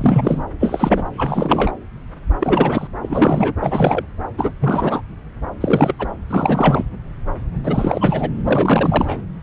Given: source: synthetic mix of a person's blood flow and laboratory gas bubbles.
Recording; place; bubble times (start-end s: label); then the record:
Doppler ultrasound of blood flow; subclavian vein
0.00-0.45 s: bubbles
0.59-1.07 s: bubbles
1.16-1.72 s: bubbles
2.40-2.88 s: bubbles
3.02-3.53 s: bubbles
3.59-4.04 s: bubbles
4.38-4.52 s: bubbles
4.61-5.02 s: bubbles
5.61-5.95 s: bubbles
5.99-6.11 s: bubbles
6.29-6.84 s: bubbles
7.64-8.30 s: bubbles
8.44-9.20 s: bubbles
From the record:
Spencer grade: 3 (all of the cardiac periods contain showers or single bubble signals, but not dominating or overriding the cardiac motion signals); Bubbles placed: anywhere in the cardiac cycle